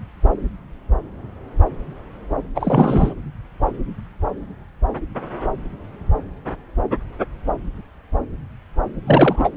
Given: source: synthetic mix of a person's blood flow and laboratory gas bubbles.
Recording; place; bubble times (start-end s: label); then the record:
Doppler ultrasound of blood flow; subclavian vein
2.55-3.14 s: bubbles
9.06-9.49 s: bubbles
From the record:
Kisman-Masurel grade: 223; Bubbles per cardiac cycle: several, 3 to 8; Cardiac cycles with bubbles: 10 to 50%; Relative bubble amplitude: loud (0.450 to 0.775); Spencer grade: 2 (many but less than half of the cardiac periods contain bubble signals, singularly or in groups); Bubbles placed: anywhere in the cardiac cycle